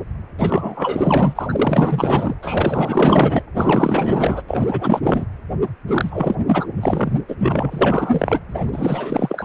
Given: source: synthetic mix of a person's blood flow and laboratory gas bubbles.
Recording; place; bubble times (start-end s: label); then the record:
Doppler ultrasound of blood flow; precordium
0.39-2.35 s: bubbles
2.42-3.42 s: bubbles
3.55-4.42 s: bubbles
4.48-5.25 s: bubbles
5.87-6.36 s: bubbles
6.46-6.68 s: bubbles
6.80-7.21 s: bubbles
7.28-7.35 s: bubbles
7.40-8.40 s: bubbles
8.49-8.70 s: bubbles
8.72-9.45 s: bubbles
From the record:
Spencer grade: 4 (maximum detectable bubble signal sounding continuously throughout systole and diastole of every cardiac period, and overriding the amplitude of the normal cardiac signals); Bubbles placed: anywhere in the cardiac cycle